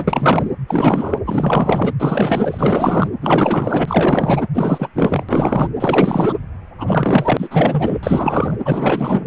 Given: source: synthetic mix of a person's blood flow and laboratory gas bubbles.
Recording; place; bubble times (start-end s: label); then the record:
Doppler ultrasound of blood flow; precordium
0.00-0.51 s: bubbles
0.67-1.18 s: bubbles
1.25-1.93 s: bubbles
1.99-3.08 s: bubbles
3.21-4.43 s: bubbles
4.54-4.90 s: bubbles
4.96-5.24 s: bubbles
5.29-5.69 s: bubbles
5.80-6.33 s: bubbles
6.78-7.98 s: bubbles
8.03-8.56 s: bubbles
8.65-9.25 s: bubbles
From the record:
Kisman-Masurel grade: 444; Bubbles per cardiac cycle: continuous sound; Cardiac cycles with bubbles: 100%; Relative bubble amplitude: maximal (0.775 to 0.999); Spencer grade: 4 (maximum detectable bubble signal sounding continuously throughout systole and diastole of every cardiac period, and overriding the amplitude of the normal cardiac signals); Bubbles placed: anywhere in the cardiac cycle